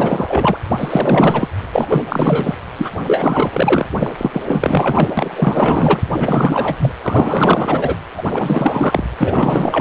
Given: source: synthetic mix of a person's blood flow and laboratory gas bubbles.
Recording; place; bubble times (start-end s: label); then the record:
Doppler ultrasound of blood flow; precordium
0.00-0.57 s: bubbles
0.78-1.48 s: bubbles
1.72-2.05 s: bubbles
2.08-2.55 s: bubbles
2.77-2.90 s: bubbles
3.05-3.85 s: bubbles
3.99-4.13 s: bubbles
4.17-4.41 s: bubbles
4.48-5.12 s: bubbles
5.17-6.00 s: bubbles
6.12-6.92 s: bubbles
7.02-7.97 s: bubbles
8.17-8.24 s: bubbles
8.32-9.04 s: bubbles
9.21-9.81 s: bubbles
From the record:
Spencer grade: 4 (maximum detectable bubble signal sounding continuously throughout systole and diastole of every cardiac period, and overriding the amplitude of the normal cardiac signals); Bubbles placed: anywhere in the cardiac cycle